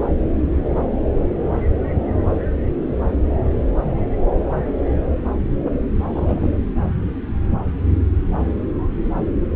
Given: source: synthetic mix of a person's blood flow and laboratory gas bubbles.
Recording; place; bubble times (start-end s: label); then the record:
Doppler ultrasound of blood flow; subclavian vein
6.12-6.56 s: bubbles
From the record:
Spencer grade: 2 (many but less than half of the cardiac periods contain bubble signals, singularly or in groups); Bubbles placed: anywhere in the cardiac cycle